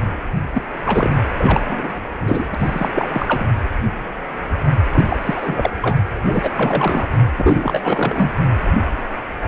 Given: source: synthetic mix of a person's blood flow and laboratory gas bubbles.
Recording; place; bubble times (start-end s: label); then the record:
Doppler ultrasound of blood flow; precordium
0.55-0.61 s: bubbles
0.85-1.15 s: bubbles
1.35-1.61 s: bubbles
1.67-2.00 s: bubbles
2.21-2.44 s: bubbles
2.52-2.55 s: bubbles
2.58-2.90 s: bubbles
2.94-3.08 s: bubbles
3.12-3.46 s: bubbles
4.90-5.05 s: bubbles
5.08-5.71 s: bubbles
5.82-5.98 s: bubbles
6.26-6.50 s: bubbles
6.55-7.07 s: bubbles
7.36-8.31 s: bubbles
From the record:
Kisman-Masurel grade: 332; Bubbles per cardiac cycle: rolling drumbeat, 9 or more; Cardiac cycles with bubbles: 50 to 99%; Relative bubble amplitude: moderate (0.250 to 0.450); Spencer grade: 3 (all of the cardiac periods contain showers or single bubble signals, but not dominating or overriding the cardiac motion signals); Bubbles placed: anywhere in the cardiac cycle